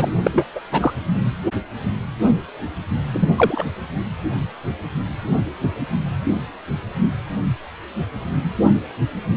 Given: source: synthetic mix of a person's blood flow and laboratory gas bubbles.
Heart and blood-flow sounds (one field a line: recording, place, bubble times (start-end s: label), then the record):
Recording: Doppler ultrasound of blood flow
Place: precordium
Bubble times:
0.00-0.10 s: bubbles
0.23-0.46 s: bubbles
0.55-0.59 s: bubbles
0.71-0.94 s: bubbles
3.13-3.29 s: bubbles
3.35-3.65 s: bubbles
From the record:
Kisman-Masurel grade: 223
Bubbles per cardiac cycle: several, 3 to 8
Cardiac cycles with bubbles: 10 to 50%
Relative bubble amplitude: loud (0.450 to 0.775)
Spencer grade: 2 (many but less than half of the cardiac periods contain bubble signals, singularly or in groups)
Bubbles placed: anywhere in the cardiac cycle